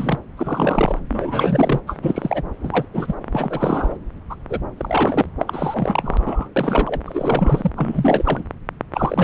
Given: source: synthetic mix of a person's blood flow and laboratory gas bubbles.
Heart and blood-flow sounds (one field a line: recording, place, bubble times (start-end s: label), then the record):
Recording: Doppler ultrasound of blood flow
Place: subclavian vein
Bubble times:
0.00-0.18 s: bubbles
0.37-0.99 s: bubbles
1.09-1.80 s: bubbles
1.87-1.99 s: bubbles
2.02-2.42 s: bubbles
2.63-2.85 s: bubbles
2.94-3.15 s: bubbles
3.31-3.97 s: bubbles
4.29-4.35 s: bubbles
4.49-4.60 s: bubbles
4.77-5.25 s: bubbles
5.39-6.49 s: bubbles
6.56-7.00 s: bubbles
7.05-7.70 s: bubbles
7.75-8.43 s: bubbles
8.94-9.24 s: bubbles
From the record:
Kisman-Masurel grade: 343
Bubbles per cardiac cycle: rolling drumbeat, 9 or more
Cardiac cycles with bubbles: 100%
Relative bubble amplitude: loud (0.450 to 0.775)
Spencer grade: 3 (all of the cardiac periods contain showers or single bubble signals, but not dominating or overriding the cardiac motion signals)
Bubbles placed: anywhere in the cardiac cycle